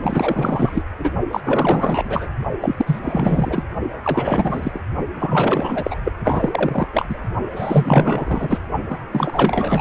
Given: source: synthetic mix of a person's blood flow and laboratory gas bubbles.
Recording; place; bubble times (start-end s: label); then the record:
Doppler ultrasound of blood flow; precordium
0.03-0.82 s: bubbles
0.98-1.11 s: bubbles
1.31-1.41 s: bubbles
1.44-2.28 s: bubbles
2.60-3.00 s: bubbles
3.02-3.65 s: bubbles
4.04-4.71 s: bubbles
4.74-4.79 s: bubbles
5.18-5.99 s: bubbles
6.04-6.12 s: bubbles
6.24-6.88 s: bubbles
6.93-7.19 s: bubbles
7.48-8.59 s: bubbles
8.89-8.99 s: bubbles
9.11-9.81 s: bubbles
From the record:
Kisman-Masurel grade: 444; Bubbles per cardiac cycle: continuous sound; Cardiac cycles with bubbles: 100%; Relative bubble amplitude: maximal (0.775 to 0.999); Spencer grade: 4 (maximum detectable bubble signal sounding continuously throughout systole and diastole of every cardiac period, and overriding the amplitude of the normal cardiac signals); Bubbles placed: only in the low amplitude regions of the cardiac cycle